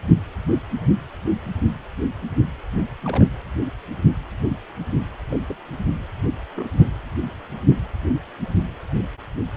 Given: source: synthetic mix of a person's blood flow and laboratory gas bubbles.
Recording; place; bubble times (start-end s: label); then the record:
Doppler ultrasound of blood flow; precordium
1.25-1.31 s: bubbles
3.05-3.26 s: bubbles
5.30-5.39 s: bubbles
5.47-5.57 s: bubbles
6.55-6.67 s: bubbles
6.73-6.84 s: bubbles
From the record:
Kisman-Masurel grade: 121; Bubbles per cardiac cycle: 1 to 2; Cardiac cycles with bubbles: 10 to 50%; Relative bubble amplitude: barely perceptible (0.100 to 0.250); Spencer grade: 2 (many but less than half of the cardiac periods contain bubble signals, singularly or in groups); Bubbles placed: anywhere in the cardiac cycle